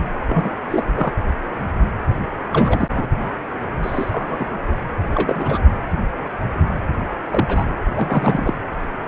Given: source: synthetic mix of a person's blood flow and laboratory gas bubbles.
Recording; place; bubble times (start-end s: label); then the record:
Doppler ultrasound of blood flow; precordium
0.27-0.55 s: bubbles
0.70-0.84 s: bubbles
0.94-1.13 s: bubbles
2.52-2.89 s: bubbles
2.96-3.06 s: bubbles
3.82-4.56 s: bubbles
5.15-5.64 s: bubbles
7.30-7.64 s: bubbles
7.94-8.54 s: bubbles
9.06-9.08 s: bubbles
From the record:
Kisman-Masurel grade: 232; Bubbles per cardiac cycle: several, 3 to 8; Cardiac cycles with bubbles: 50 to 99%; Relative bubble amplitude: moderate (0.250 to 0.450); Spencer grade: 3 (all of the cardiac periods contain showers or single bubble signals, but not dominating or overriding the cardiac motion signals); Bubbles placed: anywhere in the cardiac cycle